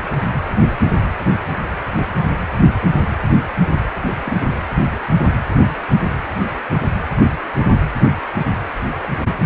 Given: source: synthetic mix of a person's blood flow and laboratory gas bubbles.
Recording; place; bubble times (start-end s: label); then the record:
Doppler ultrasound of blood flow; precordium
4.25-4.43 s: bubbles
7.17-7.29 s: bubbles
9.03-9.09 s: bubbles
From the record:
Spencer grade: 2 (many but less than half of the cardiac periods contain bubble signals, singularly or in groups); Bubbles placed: anywhere in the cardiac cycle